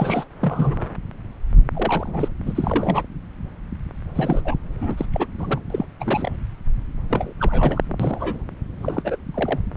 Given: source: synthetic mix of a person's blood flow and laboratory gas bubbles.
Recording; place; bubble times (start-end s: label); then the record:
Doppler ultrasound of blood flow; subclavian vein
0.00-0.24 s: bubbles
0.41-0.84 s: bubbles
1.74-2.28 s: bubbles
2.46-3.03 s: bubbles
4.15-4.41 s: bubbles
4.45-4.54 s: bubbles
4.81-5.06 s: bubbles
5.13-5.26 s: bubbles
5.38-5.61 s: bubbles
5.70-5.86 s: bubbles
6.00-6.31 s: bubbles
7.10-7.33 s: bubbles
7.39-7.81 s: bubbles
8.00-8.44 s: bubbles
8.81-9.16 s: bubbles
9.34-9.60 s: bubbles
From the record:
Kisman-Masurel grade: 232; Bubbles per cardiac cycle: several, 3 to 8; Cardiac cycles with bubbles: 50 to 99%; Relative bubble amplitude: moderate (0.250 to 0.450); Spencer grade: 3 (all of the cardiac periods contain showers or single bubble signals, but not dominating or overriding the cardiac motion signals); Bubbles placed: anywhere in the cardiac cycle